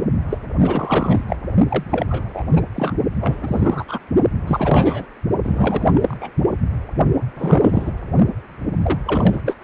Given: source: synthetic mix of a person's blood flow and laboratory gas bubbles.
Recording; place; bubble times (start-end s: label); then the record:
Doppler ultrasound of blood flow; precordium
0.29-0.38 s: bubbles
0.62-1.24 s: bubbles
1.27-1.36 s: bubbles
1.69-1.83 s: bubbles
1.90-2.44 s: bubbles
2.54-2.61 s: bubbles
2.75-2.95 s: bubbles
3.21-3.84 s: bubbles
3.88-4.00 s: bubbles
4.47-5.06 s: bubbles
5.43-5.89 s: bubbles
5.94-6.17 s: bubbles
6.20-6.30 s: bubbles
7.36-7.92 s: bubbles
8.82-9.01 s: bubbles
9.05-9.42 s: bubbles
9.45-9.56 s: bubbles
From the record:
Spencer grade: 3 (all of the cardiac periods contain showers or single bubble signals, but not dominating or overriding the cardiac motion signals); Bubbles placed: only in the low amplitude regions of the cardiac cycle